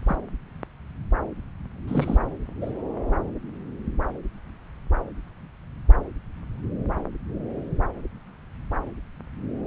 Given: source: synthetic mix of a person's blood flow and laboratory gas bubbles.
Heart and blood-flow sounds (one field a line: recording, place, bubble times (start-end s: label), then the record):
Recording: Doppler ultrasound of blood flow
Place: subclavian vein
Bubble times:
0.07-0.16 s: bubbles
1.88-2.18 s: bubbles
2.62-2.71 s: bubbles
From the record:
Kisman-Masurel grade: 122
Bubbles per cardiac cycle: 1 to 2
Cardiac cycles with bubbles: 10 to 50%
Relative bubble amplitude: moderate (0.250 to 0.450)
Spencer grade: 2 (many but less than half of the cardiac periods contain bubble signals, singularly or in groups)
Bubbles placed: anywhere in the cardiac cycle